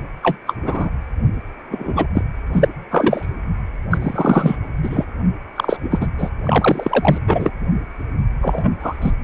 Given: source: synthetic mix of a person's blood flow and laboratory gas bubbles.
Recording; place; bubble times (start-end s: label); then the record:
Doppler ultrasound of blood flow; precordium
0.23-0.37 s: bubbles
0.47-0.55 s: bubbles
0.64-0.90 s: bubbles
1.71-2.07 s: bubbles
2.15-2.23 s: bubbles
2.53-2.68 s: bubbles
2.91-3.31 s: bubbles
3.90-3.98 s: bubbles
4.00-4.56 s: bubbles
4.82-5.05 s: bubbles
5.56-5.77 s: bubbles
5.82-6.07 s: bubbles
6.18-6.30 s: bubbles
6.43-7.18 s: bubbles
7.27-7.52 s: bubbles
8.41-8.72 s: bubbles
8.79-9.11 s: bubbles
From the record:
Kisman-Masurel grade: 243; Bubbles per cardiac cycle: several, 3 to 8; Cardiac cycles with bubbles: 100%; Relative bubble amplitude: loud (0.450 to 0.775); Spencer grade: 3 (all of the cardiac periods contain showers or single bubble signals, but not dominating or overriding the cardiac motion signals); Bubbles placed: anywhere in the cardiac cycle